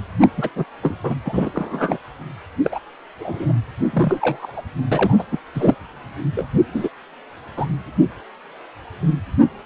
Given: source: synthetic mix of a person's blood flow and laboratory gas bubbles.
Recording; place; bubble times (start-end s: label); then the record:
Doppler ultrasound of blood flow; precordium
0.21-0.28 s: bubbles
0.37-0.49 s: bubbles
0.56-0.65 s: bubbles
0.81-0.96 s: bubbles
1.03-1.15 s: bubbles
1.25-2.00 s: bubbles
2.64-2.79 s: bubbles
3.19-3.52 s: bubbles
3.93-4.62 s: bubbles
4.92-5.24 s: bubbles
5.32-5.38 s: bubbles
5.54-5.75 s: bubbles
6.36-6.48 s: bubbles
6.74-6.89 s: bubbles
7.57-7.66 s: bubbles
From the record:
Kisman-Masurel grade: 233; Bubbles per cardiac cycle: several, 3 to 8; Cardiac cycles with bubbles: 50 to 99%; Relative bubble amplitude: loud (0.450 to 0.775); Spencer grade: 3 (all of the cardiac periods contain showers or single bubble signals, but not dominating or overriding the cardiac motion signals); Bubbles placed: anywhere in the cardiac cycle